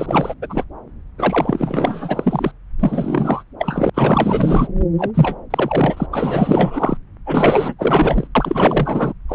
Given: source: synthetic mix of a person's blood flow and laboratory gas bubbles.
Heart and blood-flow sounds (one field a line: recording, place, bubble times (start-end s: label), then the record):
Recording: Doppler ultrasound of blood flow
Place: subclavian vein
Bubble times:
0.00-0.34 s: bubbles
0.42-0.64 s: bubbles
1.18-2.52 s: bubbles
2.79-3.44 s: bubbles
3.58-3.90 s: bubbles
3.94-4.69 s: bubbles
4.98-5.11 s: bubbles
5.13-5.37 s: bubbles
5.50-6.06 s: bubbles
6.11-6.97 s: bubbles
7.26-7.75 s: bubbles
7.79-8.27 s: bubbles
8.35-9.13 s: bubbles
9.29-9.35 s: bubbles
From the record:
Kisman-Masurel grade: 444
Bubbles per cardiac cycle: continuous sound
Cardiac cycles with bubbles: 100%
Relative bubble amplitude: maximal (0.775 to 0.999)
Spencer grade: 4 (maximum detectable bubble signal sounding continuously throughout systole and diastole of every cardiac period, and overriding the amplitude of the normal cardiac signals)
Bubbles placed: anywhere in the cardiac cycle